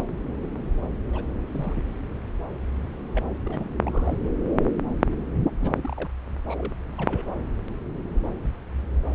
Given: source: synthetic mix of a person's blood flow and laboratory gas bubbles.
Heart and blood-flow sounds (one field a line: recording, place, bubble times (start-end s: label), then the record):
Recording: Doppler ultrasound of blood flow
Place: subclavian vein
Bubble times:
1.12-1.23 s: bubbles
1.47-1.83 s: bubbles
3.13-3.34 s: bubbles
3.44-4.17 s: bubbles
5.59-6.11 s: bubbles
6.43-6.74 s: bubbles
6.97-7.24 s: bubbles
From the record:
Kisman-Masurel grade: 221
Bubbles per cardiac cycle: several, 3 to 8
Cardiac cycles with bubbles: 10 to 50%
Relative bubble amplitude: barely perceptible (0.100 to 0.250)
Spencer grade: 2 (many but less than half of the cardiac periods contain bubble signals, singularly or in groups)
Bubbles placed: anywhere in the cardiac cycle